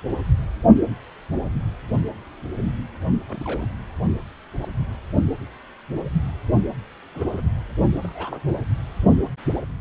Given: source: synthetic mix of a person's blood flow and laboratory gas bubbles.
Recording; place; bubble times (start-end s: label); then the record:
Doppler ultrasound of blood flow; precordium
3.29-3.67 s: bubbles
4.61-4.69 s: bubbles
7.14-7.42 s: bubbles
8.04-8.40 s: bubbles
From the record:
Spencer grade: 2 (many but less than half of the cardiac periods contain bubble signals, singularly or in groups); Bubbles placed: only in the low amplitude regions of the cardiac cycle